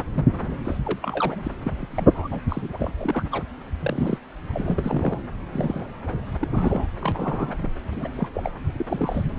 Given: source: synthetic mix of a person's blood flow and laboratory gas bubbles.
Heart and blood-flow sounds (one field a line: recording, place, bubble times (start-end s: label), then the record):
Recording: Doppler ultrasound of blood flow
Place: subclavian vein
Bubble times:
0.00-0.04 s: bubbles
0.15-0.25 s: bubbles
0.64-0.78 s: bubbles
0.84-0.99 s: bubbles
1.02-1.48 s: bubbles
1.64-1.72 s: bubbles
1.80-2.07 s: bubbles
2.13-2.28 s: bubbles
2.31-2.40 s: bubbles
2.48-2.69 s: bubbles
2.73-2.92 s: bubbles
2.97-3.24 s: bubbles
3.31-3.43 s: bubbles
3.81-4.19 s: bubbles
4.53-5.19 s: bubbles
5.52-5.86 s: bubbles
6.05-6.15 s: bubbles
6.32-6.37 s: bubbles
6.41-6.49 s: bubbles
6.51-6.88 s: bubbles
7.00-7.56 s: bubbles
7.62-7.69 s: bubbles
7.92-8.09 s: bubbles
8.16-8.28 s: bubbles
8.34-8.52 s: bubbles
8.76-9.23 s: bubbles
From the record:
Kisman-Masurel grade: 232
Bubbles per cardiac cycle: several, 3 to 8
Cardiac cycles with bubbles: 50 to 99%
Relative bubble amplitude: moderate (0.250 to 0.450)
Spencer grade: 3 (all of the cardiac periods contain showers or single bubble signals, but not dominating or overriding the cardiac motion signals)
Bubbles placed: anywhere in the cardiac cycle